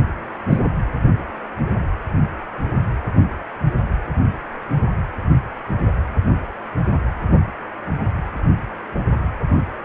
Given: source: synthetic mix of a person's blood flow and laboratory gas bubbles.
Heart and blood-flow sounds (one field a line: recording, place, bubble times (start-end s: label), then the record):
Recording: Doppler ultrasound of blood flow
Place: precordium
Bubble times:
0.49-0.63 s: bubbles
From the record:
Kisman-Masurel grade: 113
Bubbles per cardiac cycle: 1 to 2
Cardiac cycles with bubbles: 1 to 10%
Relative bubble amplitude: loud (0.450 to 0.775)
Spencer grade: 1 (occasional bubble signal discernible with the cardiac motion signal, with majority of cardiac periods free of bubbles)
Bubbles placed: anywhere in the cardiac cycle